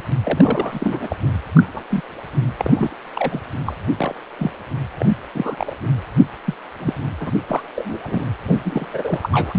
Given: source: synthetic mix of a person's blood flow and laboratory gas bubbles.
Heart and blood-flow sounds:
Doppler ultrasound of blood flow; precordium
0.24-1.16 s: bubbles
1.23-1.30 s: bubbles
1.54-1.63 s: bubbles
1.73-1.82 s: bubbles
1.90-2.01 s: bubbles
2.58-2.95 s: bubbles
3.15-3.42 s: bubbles
3.66-3.74 s: bubbles
3.98-4.13 s: bubbles
4.38-4.51 s: bubbles
4.99-5.17 s: bubbles
5.34-5.77 s: bubbles
6.45-6.54 s: bubbles
6.79-6.94 s: bubbles
7.20-7.32 s: bubbles
7.48-7.62 s: bubbles
7.75-7.99 s: bubbles
8.02-8.27 s: bubbles
8.47-8.59 s: bubbles
8.63-9.59 s: bubbles
From the record:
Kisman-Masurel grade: 242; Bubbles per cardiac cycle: several, 3 to 8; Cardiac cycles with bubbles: 100%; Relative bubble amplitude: moderate (0.250 to 0.450); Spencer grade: 3 (all of the cardiac periods contain showers or single bubble signals, but not dominating or overriding the cardiac motion signals); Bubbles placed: anywhere in the cardiac cycle

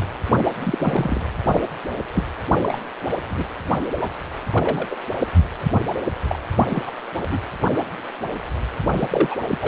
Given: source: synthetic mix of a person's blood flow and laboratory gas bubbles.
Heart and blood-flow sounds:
Doppler ultrasound of blood flow; precordium
0.60-1.21 s: bubbles
1.54-1.60 s: bubbles
2.15-2.23 s: bubbles
2.62-2.81 s: bubbles
3.29-3.46 s: bubbles
3.95-4.07 s: bubbles
4.52-4.88 s: bubbles
4.90-4.96 s: bubbles
6.28-6.39 s: bubbles
6.68-6.93 s: bubbles
7.31-7.40 s: bubbles
7.62-7.67 s: bubbles
8.93-9.36 s: bubbles
9.50-9.58 s: bubbles
9.62-9.68 s: bubbles
From the record:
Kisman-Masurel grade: 232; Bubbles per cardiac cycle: several, 3 to 8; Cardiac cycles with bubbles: 50 to 99%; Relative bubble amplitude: moderate (0.250 to 0.450); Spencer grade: 3 (all of the cardiac periods contain showers or single bubble signals, but not dominating or overriding the cardiac motion signals); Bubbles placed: anywhere in the cardiac cycle

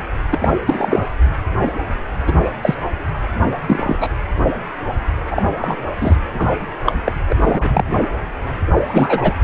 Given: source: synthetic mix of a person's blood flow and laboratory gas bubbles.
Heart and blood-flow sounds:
Doppler ultrasound of blood flow; precordium
0.31-0.52 s: bubbles
0.68-1.06 s: bubbles
2.27-2.33 s: bubbles
2.62-2.75 s: bubbles
3.67-3.96 s: bubbles
4.00-4.09 s: bubbles
5.26-5.42 s: bubbles
5.57-5.77 s: bubbles
6.00-6.16 s: bubbles
6.34-6.49 s: bubbles
6.86-6.92 s: bubbles
7.04-7.12 s: bubbles
7.29-7.36 s: bubbles
7.41-7.84 s: bubbles
8.87-9.37 s: bubbles
From the record:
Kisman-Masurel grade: 233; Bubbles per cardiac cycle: several, 3 to 8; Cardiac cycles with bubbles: 50 to 99%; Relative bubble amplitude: loud (0.450 to 0.775); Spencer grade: 3 (all of the cardiac periods contain showers or single bubble signals, but not dominating or overriding the cardiac motion signals); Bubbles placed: anywhere in the cardiac cycle

